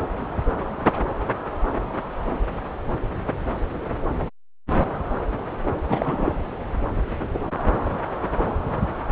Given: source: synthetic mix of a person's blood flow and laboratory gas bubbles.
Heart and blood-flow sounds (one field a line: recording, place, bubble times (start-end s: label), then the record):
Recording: Doppler ultrasound of blood flow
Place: subclavian vein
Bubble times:
5.88-6.33 s: bubbles
From the record:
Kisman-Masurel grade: 222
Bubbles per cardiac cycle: several, 3 to 8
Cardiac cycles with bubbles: 10 to 50%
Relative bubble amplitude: moderate (0.250 to 0.450)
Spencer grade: 2 (many but less than half of the cardiac periods contain bubble signals, singularly or in groups)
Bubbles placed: anywhere in the cardiac cycle